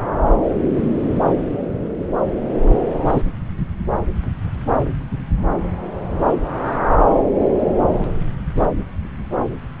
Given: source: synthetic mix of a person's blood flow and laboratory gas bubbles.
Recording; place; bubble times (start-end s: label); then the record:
Doppler ultrasound of blood flow; subclavian vein
3.05-3.23 s: bubbles
From the record:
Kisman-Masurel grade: 113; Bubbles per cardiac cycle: 1 to 2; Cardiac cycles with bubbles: 1 to 10%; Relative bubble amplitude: loud (0.450 to 0.775); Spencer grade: 1 (occasional bubble signal discernible with the cardiac motion signal, with majority of cardiac periods free of bubbles); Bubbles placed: anywhere in the cardiac cycle